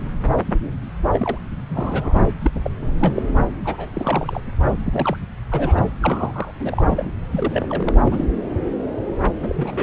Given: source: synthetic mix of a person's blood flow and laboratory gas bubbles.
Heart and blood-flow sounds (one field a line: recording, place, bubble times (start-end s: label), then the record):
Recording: Doppler ultrasound of blood flow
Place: subclavian vein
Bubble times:
1.12-1.38 s: bubbles
1.69-2.23 s: bubbles
2.30-2.32 s: bubbles
2.41-2.50 s: bubbles
2.63-2.71 s: bubbles
2.81-2.94 s: bubbles
3.00-3.22 s: bubbles
3.65-4.41 s: bubbles
4.85-5.17 s: bubbles
5.51-5.82 s: bubbles
6.00-6.51 s: bubbles
6.59-6.84 s: bubbles
6.88-7.12 s: bubbles
7.32-7.94 s: bubbles
8.04-8.24 s: bubbles
9.41-9.83 s: bubbles
From the record:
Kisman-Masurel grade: 332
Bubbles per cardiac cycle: rolling drumbeat, 9 or more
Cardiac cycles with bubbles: 50 to 99%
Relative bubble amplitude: moderate (0.250 to 0.450)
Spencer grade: 3 (all of the cardiac periods contain showers or single bubble signals, but not dominating or overriding the cardiac motion signals)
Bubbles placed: anywhere in the cardiac cycle